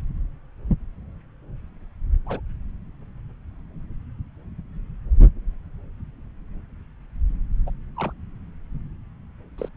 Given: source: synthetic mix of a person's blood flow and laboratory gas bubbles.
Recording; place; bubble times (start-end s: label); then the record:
Doppler ultrasound of blood flow; subclavian vein
2.27-2.40 s: bubbles
7.67-7.73 s: bubbles
7.97-8.12 s: bubbles
9.58-9.69 s: bubbles
From the record:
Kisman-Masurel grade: 121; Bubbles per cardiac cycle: 1 to 2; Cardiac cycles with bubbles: 10 to 50%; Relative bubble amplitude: barely perceptible (0.100 to 0.250); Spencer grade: 2 (many but less than half of the cardiac periods contain bubble signals, singularly or in groups); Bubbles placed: anywhere in the cardiac cycle